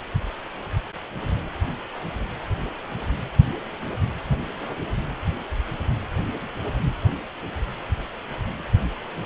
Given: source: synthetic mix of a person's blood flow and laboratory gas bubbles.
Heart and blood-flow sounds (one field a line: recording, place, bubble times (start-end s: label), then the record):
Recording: Doppler ultrasound of blood flow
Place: precordium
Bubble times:
no bubbles
From the record:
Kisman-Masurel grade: 000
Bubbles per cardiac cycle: 0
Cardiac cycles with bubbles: 0%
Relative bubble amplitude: no bubbles discernible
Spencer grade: 0 (complete lack of bubble signals)